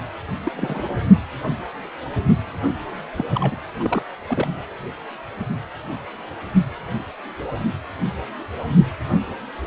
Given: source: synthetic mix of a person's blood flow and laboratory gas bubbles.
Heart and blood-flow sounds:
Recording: Doppler ultrasound of blood flow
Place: precordium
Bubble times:
0.45-0.52 s: bubbles
0.57-0.99 s: bubbles
3.16-3.25 s: bubbles
3.33-3.57 s: bubbles
3.79-4.02 s: bubbles
4.29-4.47 s: bubbles
From the record:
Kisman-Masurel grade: 221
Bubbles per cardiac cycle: several, 3 to 8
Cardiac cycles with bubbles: 10 to 50%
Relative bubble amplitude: barely perceptible (0.100 to 0.250)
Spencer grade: 2 (many but less than half of the cardiac periods contain bubble signals, singularly or in groups)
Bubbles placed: anywhere in the cardiac cycle

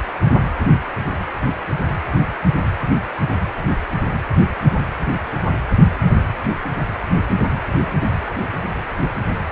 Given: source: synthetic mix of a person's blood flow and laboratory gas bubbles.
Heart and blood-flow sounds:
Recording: Doppler ultrasound of blood flow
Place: precordium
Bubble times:
no bubbles
From the record:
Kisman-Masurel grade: 000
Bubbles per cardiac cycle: 0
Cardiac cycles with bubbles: 0%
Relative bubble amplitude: no bubbles discernible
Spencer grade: 0 (complete lack of bubble signals)

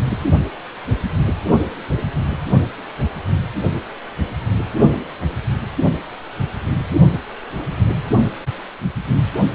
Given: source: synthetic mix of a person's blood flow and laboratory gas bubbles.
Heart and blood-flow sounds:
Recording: Doppler ultrasound of blood flow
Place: precordium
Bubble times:
0.09-0.18 s: bubbles
From the record:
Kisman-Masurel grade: 111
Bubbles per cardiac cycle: 1 to 2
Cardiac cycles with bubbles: 1 to 10%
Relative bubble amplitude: barely perceptible (0.100 to 0.250)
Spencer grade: 1 (occasional bubble signal discernible with the cardiac motion signal, with majority of cardiac periods free of bubbles)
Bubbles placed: only in the low amplitude regions of the cardiac cycle

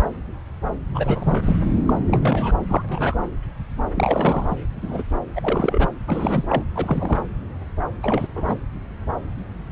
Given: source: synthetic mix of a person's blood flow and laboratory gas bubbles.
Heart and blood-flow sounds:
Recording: Doppler ultrasound of blood flow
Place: subclavian vein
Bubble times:
0.95-1.56 s: bubbles
1.86-1.94 s: bubbles
2.08-2.52 s: bubbles
2.68-2.83 s: bubbles
2.89-3.15 s: bubbles
3.94-4.55 s: bubbles
4.82-5.03 s: bubbles
5.35-5.88 s: bubbles
6.06-6.63 s: bubbles
6.75-7.21 s: bubbles
8.03-8.28 s: bubbles
8.35-8.57 s: bubbles
From the record:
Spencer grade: 3 (all of the cardiac periods contain showers or single bubble signals, but not dominating or overriding the cardiac motion signals)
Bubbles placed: anywhere in the cardiac cycle

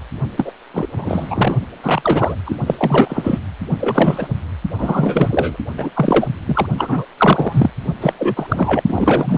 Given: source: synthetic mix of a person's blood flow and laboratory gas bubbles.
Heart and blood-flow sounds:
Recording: Doppler ultrasound of blood flow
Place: precordium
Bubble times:
0.37-0.52 s: bubbles
0.73-0.87 s: bubbles
0.94-1.55 s: bubbles
1.83-2.35 s: bubbles
2.45-2.56 s: bubbles
2.66-2.75 s: bubbles
2.78-3.38 s: bubbles
3.77-4.28 s: bubbles
4.78-5.57 s: bubbles
5.78-5.90 s: bubbles
5.95-6.28 s: bubbles
6.47-6.67 s: bubbles
6.78-7.05 s: bubbles
7.17-7.70 s: bubbles
8.00-8.13 s: bubbles
8.18-8.83 s: bubbles
8.85-9.38 s: bubbles
From the record:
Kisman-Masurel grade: 343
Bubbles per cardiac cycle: rolling drumbeat, 9 or more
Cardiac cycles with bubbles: 100%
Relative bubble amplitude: loud (0.450 to 0.775)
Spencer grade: 3 (all of the cardiac periods contain showers or single bubble signals, but not dominating or overriding the cardiac motion signals)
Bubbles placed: only in the low amplitude regions of the cardiac cycle

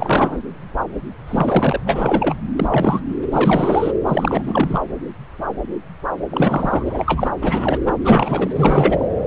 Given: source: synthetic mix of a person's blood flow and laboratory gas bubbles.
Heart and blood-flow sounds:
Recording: Doppler ultrasound of blood flow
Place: subclavian vein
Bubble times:
0.00-0.38 s: bubbles
1.27-1.80 s: bubbles
1.85-2.35 s: bubbles
2.56-3.00 s: bubbles
3.31-3.92 s: bubbles
4.07-4.79 s: bubbles
6.31-7.32 s: bubbles
7.42-7.79 s: bubbles
7.86-7.94 s: bubbles
8.04-8.51 s: bubbles
8.55-9.08 s: bubbles
From the record:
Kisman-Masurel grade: 333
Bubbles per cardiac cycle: rolling drumbeat, 9 or more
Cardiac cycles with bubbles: 50 to 99%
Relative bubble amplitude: loud (0.450 to 0.775)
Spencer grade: 3 (all of the cardiac periods contain showers or single bubble signals, but not dominating or overriding the cardiac motion signals)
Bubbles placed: anywhere in the cardiac cycle

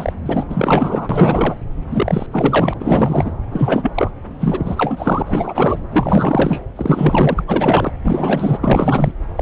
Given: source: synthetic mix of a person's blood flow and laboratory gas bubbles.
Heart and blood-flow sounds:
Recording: Doppler ultrasound of blood flow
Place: subclavian vein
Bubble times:
0.00-0.12 s: bubbles
0.25-0.44 s: bubbles
0.49-1.54 s: bubbles
1.91-2.27 s: bubbles
2.31-2.74 s: bubbles
2.77-3.35 s: bubbles
3.51-3.92 s: bubbles
3.94-4.11 s: bubbles
4.38-5.81 s: bubbles
5.91-6.61 s: bubbles
6.75-7.44 s: bubbles
7.47-7.91 s: bubbles
8.04-8.59 s: bubbles
8.63-9.12 s: bubbles
9.37-9.42 s: bubbles
From the record:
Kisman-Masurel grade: 444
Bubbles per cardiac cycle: continuous sound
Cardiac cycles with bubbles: 100%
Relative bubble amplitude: maximal (0.775 to 0.999)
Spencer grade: 4 (maximum detectable bubble signal sounding continuously throughout systole and diastole of every cardiac period, and overriding the amplitude of the normal cardiac signals)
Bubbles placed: anywhere in the cardiac cycle

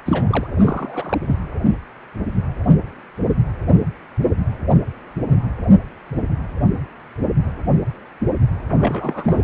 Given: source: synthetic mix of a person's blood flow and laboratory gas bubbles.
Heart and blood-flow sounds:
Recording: Doppler ultrasound of blood flow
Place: precordium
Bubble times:
0.05-0.47 s: bubbles
0.58-1.20 s: bubbles
1.26-1.35 s: bubbles
8.71-9.44 s: bubbles
From the record:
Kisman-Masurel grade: 222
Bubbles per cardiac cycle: several, 3 to 8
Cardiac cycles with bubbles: 10 to 50%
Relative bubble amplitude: moderate (0.250 to 0.450)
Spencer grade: 2 (many but less than half of the cardiac periods contain bubble signals, singularly or in groups)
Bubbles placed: anywhere in the cardiac cycle

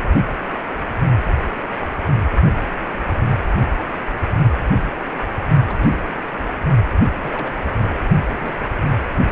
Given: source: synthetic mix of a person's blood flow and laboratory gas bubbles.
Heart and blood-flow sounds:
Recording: Doppler ultrasound of blood flow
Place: precordium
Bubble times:
5.67-6.36 s: bubbles
6.87-6.96 s: bubbles
7.00-7.08 s: bubbles
7.21-7.56 s: bubbles
7.62-8.01 s: bubbles
8.30-8.54 s: bubbles
8.97-9.04 s: bubbles
From the record:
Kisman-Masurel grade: 221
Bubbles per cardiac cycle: several, 3 to 8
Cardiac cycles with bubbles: 10 to 50%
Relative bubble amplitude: barely perceptible (0.100 to 0.250)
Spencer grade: 2 (many but less than half of the cardiac periods contain bubble signals, singularly or in groups)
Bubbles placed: only in the low amplitude regions of the cardiac cycle

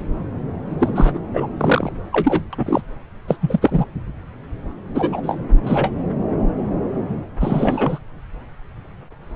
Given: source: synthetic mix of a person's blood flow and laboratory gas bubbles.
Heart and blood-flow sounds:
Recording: Doppler ultrasound of blood flow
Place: subclavian vein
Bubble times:
0.79-1.20 s: bubbles
1.33-1.47 s: bubbles
1.58-1.92 s: bubbles
2.12-2.42 s: bubbles
2.52-2.82 s: bubbles
3.27-3.37 s: bubbles
3.40-3.85 s: bubbles
4.95-5.38 s: bubbles
5.63-5.93 s: bubbles
7.40-7.99 s: bubbles
From the record:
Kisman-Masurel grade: 233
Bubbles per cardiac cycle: several, 3 to 8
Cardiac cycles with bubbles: 50 to 99%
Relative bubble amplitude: loud (0.450 to 0.775)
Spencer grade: 3 (all of the cardiac periods contain showers or single bubble signals, but not dominating or overriding the cardiac motion signals)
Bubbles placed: anywhere in the cardiac cycle

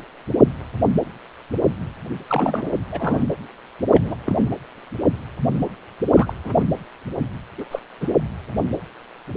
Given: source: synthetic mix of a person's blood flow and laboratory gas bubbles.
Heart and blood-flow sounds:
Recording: Doppler ultrasound of blood flow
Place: precordium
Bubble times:
2.29-2.71 s: bubbles
2.90-3.23 s: bubbles
3.94-4.14 s: bubbles
4.24-4.56 s: bubbles
6.14-6.34 s: bubbles
6.44-6.63 s: bubbles
7.58-7.64 s: bubbles
7.71-7.79 s: bubbles
8.01-8.08 s: bubbles
From the record:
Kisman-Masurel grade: 222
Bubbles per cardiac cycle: several, 3 to 8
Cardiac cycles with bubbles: 10 to 50%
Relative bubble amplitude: moderate (0.250 to 0.450)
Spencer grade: 2 (many but less than half of the cardiac periods contain bubble signals, singularly or in groups)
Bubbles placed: anywhere in the cardiac cycle

